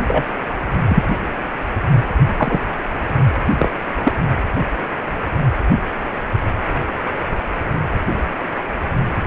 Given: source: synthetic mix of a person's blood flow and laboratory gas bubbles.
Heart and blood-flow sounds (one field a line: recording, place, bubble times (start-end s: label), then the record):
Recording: Doppler ultrasound of blood flow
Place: precordium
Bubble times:
0.08-0.24 s: bubbles
0.88-1.03 s: bubbles
2.37-2.60 s: bubbles
3.59-3.70 s: bubbles
4.03-4.12 s: bubbles
From the record:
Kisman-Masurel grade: 123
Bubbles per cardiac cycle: 1 to 2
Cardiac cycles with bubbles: 10 to 50%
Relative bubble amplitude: loud (0.450 to 0.775)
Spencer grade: 2 (many but less than half of the cardiac periods contain bubble signals, singularly or in groups)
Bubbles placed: anywhere in the cardiac cycle